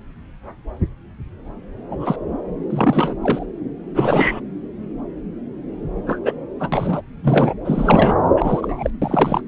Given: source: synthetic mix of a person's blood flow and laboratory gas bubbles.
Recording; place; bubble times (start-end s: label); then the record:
Doppler ultrasound of blood flow; subclavian vein
1.90-2.16 s: bubbles
2.70-3.15 s: bubbles
3.21-3.46 s: bubbles
3.95-4.41 s: bubbles
6.07-6.19 s: bubbles
6.24-6.35 s: bubbles
6.59-6.70 s: bubbles
6.72-7.01 s: bubbles
7.22-7.54 s: bubbles
7.64-8.15 s: bubbles
8.36-8.90 s: bubbles
9.02-9.41 s: bubbles
From the record:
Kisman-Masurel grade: 223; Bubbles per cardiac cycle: several, 3 to 8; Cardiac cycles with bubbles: 10 to 50%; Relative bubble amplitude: loud (0.450 to 0.775); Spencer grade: 2 (many but less than half of the cardiac periods contain bubble signals, singularly or in groups); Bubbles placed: anywhere in the cardiac cycle